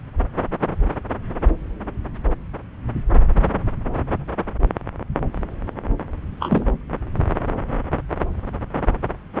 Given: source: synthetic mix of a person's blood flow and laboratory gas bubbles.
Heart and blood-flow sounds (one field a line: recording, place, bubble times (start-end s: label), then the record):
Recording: Doppler ultrasound of blood flow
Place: subclavian vein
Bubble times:
6.40-6.67 s: bubbles
From the record:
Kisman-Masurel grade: 112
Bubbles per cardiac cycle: 1 to 2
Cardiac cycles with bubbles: 1 to 10%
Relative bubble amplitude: moderate (0.250 to 0.450)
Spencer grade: 1 (occasional bubble signal discernible with the cardiac motion signal, with majority of cardiac periods free of bubbles)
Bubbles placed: anywhere in the cardiac cycle